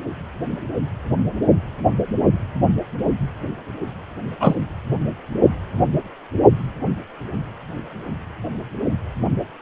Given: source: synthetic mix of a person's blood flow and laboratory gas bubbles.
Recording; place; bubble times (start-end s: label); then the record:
Doppler ultrasound of blood flow; precordium
4.40-4.55 s: bubbles
From the record:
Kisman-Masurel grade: 113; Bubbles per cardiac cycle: 1 to 2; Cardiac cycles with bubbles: 1 to 10%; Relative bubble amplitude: loud (0.450 to 0.775); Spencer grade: 1 (occasional bubble signal discernible with the cardiac motion signal, with majority of cardiac periods free of bubbles); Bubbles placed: only in the low amplitude regions of the cardiac cycle